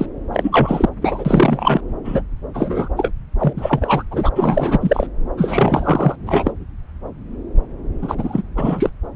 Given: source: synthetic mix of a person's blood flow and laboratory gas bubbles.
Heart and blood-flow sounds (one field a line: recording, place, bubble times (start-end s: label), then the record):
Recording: Doppler ultrasound of blood flow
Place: subclavian vein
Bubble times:
0.00-0.06 s: bubbles
0.32-0.89 s: bubbles
1.01-1.81 s: bubbles
2.04-2.22 s: bubbles
2.54-2.89 s: bubbles
2.97-3.10 s: bubbles
3.40-3.53 s: bubbles
3.56-4.02 s: bubbles
4.10-4.30 s: bubbles
4.35-5.06 s: bubbles
5.37-6.15 s: bubbles
6.26-6.51 s: bubbles
8.02-8.15 s: bubbles
8.17-8.42 s: bubbles
8.56-8.89 s: bubbles
From the record:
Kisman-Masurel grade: 333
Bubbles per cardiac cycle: rolling drumbeat, 9 or more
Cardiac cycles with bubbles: 50 to 99%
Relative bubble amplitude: loud (0.450 to 0.775)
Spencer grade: 3 (all of the cardiac periods contain showers or single bubble signals, but not dominating or overriding the cardiac motion signals)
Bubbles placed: anywhere in the cardiac cycle